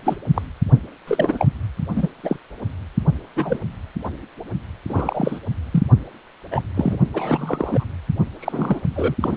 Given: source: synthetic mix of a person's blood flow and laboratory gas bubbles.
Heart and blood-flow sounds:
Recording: Doppler ultrasound of blood flow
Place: precordium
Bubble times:
0.05-0.16 s: bubbles
0.34-0.42 s: bubbles
1.07-1.47 s: bubbles
1.96-2.08 s: bubbles
2.23-2.39 s: bubbles
3.35-3.59 s: bubbles
4.04-4.08 s: bubbles
4.88-5.39 s: bubbles
5.72-5.83 s: bubbles
6.51-6.62 s: bubbles
6.75-6.96 s: bubbles
7.14-7.86 s: bubbles
8.40-8.80 s: bubbles
8.96-9.15 s: bubbles
9.20-9.37 s: bubbles
From the record:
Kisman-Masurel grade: 243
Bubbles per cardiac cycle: several, 3 to 8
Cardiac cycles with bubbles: 100%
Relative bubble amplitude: loud (0.450 to 0.775)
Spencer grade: 3 (all of the cardiac periods contain showers or single bubble signals, but not dominating or overriding the cardiac motion signals)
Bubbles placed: only in the low amplitude regions of the cardiac cycle

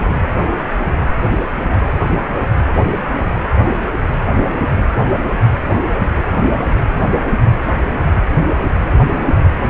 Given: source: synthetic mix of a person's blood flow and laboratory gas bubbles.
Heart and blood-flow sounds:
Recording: Doppler ultrasound of blood flow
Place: precordium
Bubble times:
no bubbles
From the record:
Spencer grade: 0 (complete lack of bubble signals)

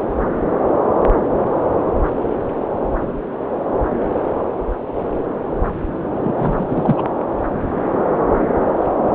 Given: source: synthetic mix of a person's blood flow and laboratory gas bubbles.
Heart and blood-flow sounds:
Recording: Doppler ultrasound of blood flow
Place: subclavian vein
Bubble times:
6.23-6.65 s: bubbles
6.70-7.06 s: bubbles
From the record:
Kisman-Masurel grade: 212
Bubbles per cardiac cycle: several, 3 to 8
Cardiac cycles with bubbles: 1 to 10%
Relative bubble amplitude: moderate (0.250 to 0.450)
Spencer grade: 1 (occasional bubble signal discernible with the cardiac motion signal, with majority of cardiac periods free of bubbles)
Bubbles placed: anywhere in the cardiac cycle

